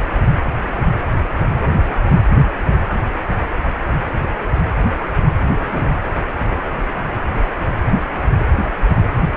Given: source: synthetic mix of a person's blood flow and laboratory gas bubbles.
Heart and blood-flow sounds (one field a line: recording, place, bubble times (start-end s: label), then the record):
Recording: Doppler ultrasound of blood flow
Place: precordium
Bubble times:
5.53-6.00 s: bubbles
From the record:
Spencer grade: 1 (occasional bubble signal discernible with the cardiac motion signal, with majority of cardiac periods free of bubbles)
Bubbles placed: anywhere in the cardiac cycle